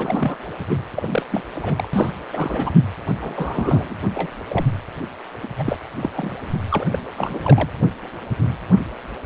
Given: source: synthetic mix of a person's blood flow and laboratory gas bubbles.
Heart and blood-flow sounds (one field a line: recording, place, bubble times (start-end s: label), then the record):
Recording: Doppler ultrasound of blood flow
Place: precordium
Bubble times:
0.00-0.36 s: bubbles
0.69-0.78 s: bubbles
0.96-1.23 s: bubbles
1.31-1.43 s: bubbles
1.55-1.88 s: bubbles
1.93-2.10 s: bubbles
2.33-2.71 s: bubbles
3.21-3.96 s: bubbles
4.14-4.29 s: bubbles
4.50-4.65 s: bubbles
5.42-5.47 s: bubbles
5.58-5.76 s: bubbles
6.01-6.37 s: bubbles
6.70-6.86 s: bubbles
6.92-6.99 s: bubbles
7.17-7.39 s: bubbles
7.42-7.70 s: bubbles
From the record:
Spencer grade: 3 (all of the cardiac periods contain showers or single bubble signals, but not dominating or overriding the cardiac motion signals)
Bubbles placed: anywhere in the cardiac cycle